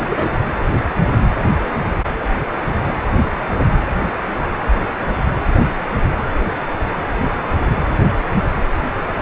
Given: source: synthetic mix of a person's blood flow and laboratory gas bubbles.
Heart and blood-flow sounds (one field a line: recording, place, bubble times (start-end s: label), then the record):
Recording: Doppler ultrasound of blood flow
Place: precordium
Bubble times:
0.00-0.06 s: bubbles
0.09-0.31 s: bubbles
From the record:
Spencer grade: 1 (occasional bubble signal discernible with the cardiac motion signal, with majority of cardiac periods free of bubbles)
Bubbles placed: anywhere in the cardiac cycle